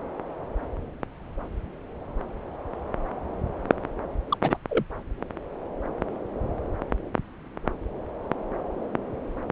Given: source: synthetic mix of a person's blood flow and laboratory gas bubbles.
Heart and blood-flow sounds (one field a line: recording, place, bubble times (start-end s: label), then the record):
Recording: Doppler ultrasound of blood flow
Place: subclavian vein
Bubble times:
4.31-4.38 s: bubbles
4.42-4.58 s: bubbles
4.69-4.83 s: bubbles
From the record:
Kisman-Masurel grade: 221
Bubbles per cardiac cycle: several, 3 to 8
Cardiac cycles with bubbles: 10 to 50%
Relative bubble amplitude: barely perceptible (0.100 to 0.250)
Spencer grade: 2 (many but less than half of the cardiac periods contain bubble signals, singularly or in groups)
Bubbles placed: anywhere in the cardiac cycle